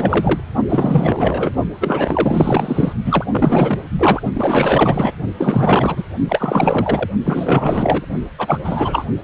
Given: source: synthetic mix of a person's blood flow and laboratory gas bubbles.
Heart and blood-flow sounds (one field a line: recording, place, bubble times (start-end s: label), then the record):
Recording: Doppler ultrasound of blood flow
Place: precordium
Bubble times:
0.00-0.41 s: bubbles
0.69-1.50 s: bubbles
1.81-2.93 s: bubbles
3.05-3.25 s: bubbles
3.31-3.82 s: bubbles
3.98-4.22 s: bubbles
4.33-5.12 s: bubbles
5.37-6.04 s: bubbles
6.29-7.09 s: bubbles
7.25-8.06 s: bubbles
8.38-8.60 s: bubbles
8.64-9.05 s: bubbles
From the record:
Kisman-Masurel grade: 444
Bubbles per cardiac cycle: continuous sound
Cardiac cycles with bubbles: 100%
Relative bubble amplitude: maximal (0.775 to 0.999)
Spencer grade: 4 (maximum detectable bubble signal sounding continuously throughout systole and diastole of every cardiac period, and overriding the amplitude of the normal cardiac signals)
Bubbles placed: only in the low amplitude regions of the cardiac cycle